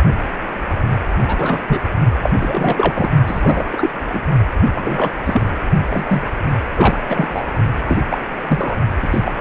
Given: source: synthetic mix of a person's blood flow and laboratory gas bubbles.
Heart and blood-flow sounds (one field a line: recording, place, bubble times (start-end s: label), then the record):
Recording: Doppler ultrasound of blood flow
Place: precordium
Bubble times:
1.26-1.62 s: bubbles
1.68-1.80 s: bubbles
2.22-3.10 s: bubbles
3.26-3.90 s: bubbles
4.13-4.21 s: bubbles
4.74-5.11 s: bubbles
5.25-5.51 s: bubbles
5.54-5.60 s: bubbles
5.89-6.22 s: bubbles
6.75-7.00 s: bubbles
7.08-7.43 s: bubbles
7.88-7.97 s: bubbles
8.11-8.18 s: bubbles
8.48-8.75 s: bubbles
9.02-9.08 s: bubbles
9.11-9.34 s: bubbles
From the record:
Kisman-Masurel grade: 243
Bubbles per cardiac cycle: several, 3 to 8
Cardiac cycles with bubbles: 100%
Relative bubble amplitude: loud (0.450 to 0.775)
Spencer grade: 3 (all of the cardiac periods contain showers or single bubble signals, but not dominating or overriding the cardiac motion signals)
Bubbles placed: only in the low amplitude regions of the cardiac cycle